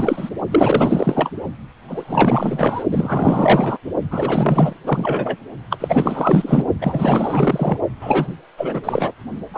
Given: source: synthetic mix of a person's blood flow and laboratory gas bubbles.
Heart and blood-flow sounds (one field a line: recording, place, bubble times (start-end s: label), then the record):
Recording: Doppler ultrasound of blood flow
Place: precordium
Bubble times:
0.00-0.30 s: bubbles
0.51-1.29 s: bubbles
1.88-2.84 s: bubbles
2.91-3.77 s: bubbles
4.10-4.73 s: bubbles
4.83-5.37 s: bubbles
5.70-6.65 s: bubbles
6.80-7.78 s: bubbles
8.00-8.33 s: bubbles
8.57-8.80 s: bubbles
8.83-9.12 s: bubbles
9.53-9.58 s: bubbles
From the record:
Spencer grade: 4 (maximum detectable bubble signal sounding continuously throughout systole and diastole of every cardiac period, and overriding the amplitude of the normal cardiac signals)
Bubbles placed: only in the low amplitude regions of the cardiac cycle